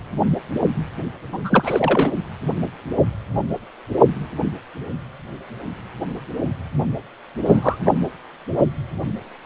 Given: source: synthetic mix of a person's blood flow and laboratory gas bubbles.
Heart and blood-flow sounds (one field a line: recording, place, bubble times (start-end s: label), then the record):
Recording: Doppler ultrasound of blood flow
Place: precordium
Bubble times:
1.32-2.11 s: bubbles
7.44-7.79 s: bubbles
7.84-7.92 s: bubbles
From the record:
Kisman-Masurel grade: 223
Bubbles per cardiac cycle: several, 3 to 8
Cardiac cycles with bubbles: 10 to 50%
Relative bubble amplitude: loud (0.450 to 0.775)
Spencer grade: 2 (many but less than half of the cardiac periods contain bubble signals, singularly or in groups)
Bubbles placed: anywhere in the cardiac cycle